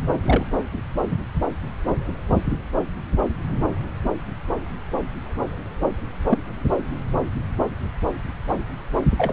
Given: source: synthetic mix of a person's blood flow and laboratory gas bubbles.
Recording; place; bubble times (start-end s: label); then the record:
Doppler ultrasound of blood flow; subclavian vein
0.23-0.45 s: bubbles
6.29-6.38 s: bubbles
9.18-9.33 s: bubbles
From the record:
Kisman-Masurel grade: 122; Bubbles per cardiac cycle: 1 to 2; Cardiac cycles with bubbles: 10 to 50%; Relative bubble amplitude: moderate (0.250 to 0.450); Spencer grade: 2 (many but less than half of the cardiac periods contain bubble signals, singularly or in groups); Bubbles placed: anywhere in the cardiac cycle